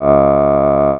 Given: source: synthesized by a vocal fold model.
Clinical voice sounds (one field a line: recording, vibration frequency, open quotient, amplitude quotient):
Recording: sustained vowel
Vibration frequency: 70 Hz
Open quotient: 0.2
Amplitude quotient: 1